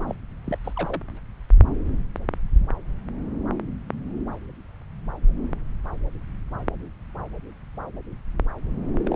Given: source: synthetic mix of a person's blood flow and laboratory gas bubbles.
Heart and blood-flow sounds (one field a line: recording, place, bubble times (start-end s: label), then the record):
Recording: Doppler ultrasound of blood flow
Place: subclavian vein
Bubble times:
0.07-0.15 s: bubbles
0.44-0.57 s: bubbles
0.64-0.73 s: bubbles
0.76-1.03 s: bubbles
9.06-9.16 s: bubbles
From the record:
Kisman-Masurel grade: 221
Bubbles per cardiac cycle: several, 3 to 8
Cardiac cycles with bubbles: 10 to 50%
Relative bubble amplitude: barely perceptible (0.100 to 0.250)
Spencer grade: 2 (many but less than half of the cardiac periods contain bubble signals, singularly or in groups)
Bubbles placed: anywhere in the cardiac cycle